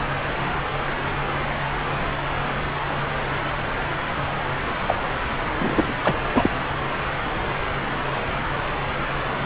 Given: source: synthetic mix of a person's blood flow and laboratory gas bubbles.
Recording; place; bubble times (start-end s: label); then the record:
Doppler ultrasound of blood flow; subclavian vein
4.88-4.95 s: bubbles
5.58-5.95 s: bubbles
6.04-6.14 s: bubbles
6.35-6.51 s: bubbles
From the record:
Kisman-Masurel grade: 213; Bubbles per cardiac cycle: several, 3 to 8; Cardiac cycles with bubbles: 1 to 10%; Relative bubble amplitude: loud (0.450 to 0.775); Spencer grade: 1 (occasional bubble signal discernible with the cardiac motion signal, with majority of cardiac periods free of bubbles); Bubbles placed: anywhere in the cardiac cycle